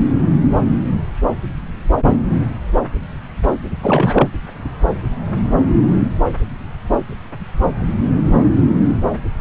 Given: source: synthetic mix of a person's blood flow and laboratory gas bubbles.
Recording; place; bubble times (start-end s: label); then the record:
Doppler ultrasound of blood flow; subclavian vein
3.82-4.29 s: bubbles
From the record:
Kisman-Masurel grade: 212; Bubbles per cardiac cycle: several, 3 to 8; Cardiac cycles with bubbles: 1 to 10%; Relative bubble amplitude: moderate (0.250 to 0.450); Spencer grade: 1 (occasional bubble signal discernible with the cardiac motion signal, with majority of cardiac periods free of bubbles); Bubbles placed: anywhere in the cardiac cycle